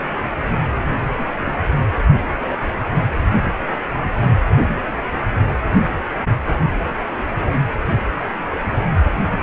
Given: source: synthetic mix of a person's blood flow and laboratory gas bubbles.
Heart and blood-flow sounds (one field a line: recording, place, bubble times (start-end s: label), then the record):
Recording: Doppler ultrasound of blood flow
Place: precordium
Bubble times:
1.15-1.59 s: bubbles
2.32-2.38 s: bubbles
2.44-2.58 s: bubbles
2.63-2.66 s: bubbles
From the record:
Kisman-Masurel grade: 211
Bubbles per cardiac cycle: several, 3 to 8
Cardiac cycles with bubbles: 1 to 10%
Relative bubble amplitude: barely perceptible (0.100 to 0.250)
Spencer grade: 1 (occasional bubble signal discernible with the cardiac motion signal, with majority of cardiac periods free of bubbles)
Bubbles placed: anywhere in the cardiac cycle